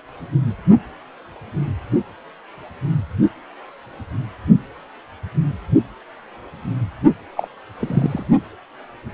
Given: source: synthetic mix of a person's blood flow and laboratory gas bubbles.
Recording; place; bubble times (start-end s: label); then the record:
Doppler ultrasound of blood flow; precordium
7.37-7.48 s: bubbles
7.79-8.25 s: bubbles
From the record:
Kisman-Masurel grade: 112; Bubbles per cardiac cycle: 1 to 2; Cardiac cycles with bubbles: 1 to 10%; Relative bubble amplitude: moderate (0.250 to 0.450); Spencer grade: 1 (occasional bubble signal discernible with the cardiac motion signal, with majority of cardiac periods free of bubbles); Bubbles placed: anywhere in the cardiac cycle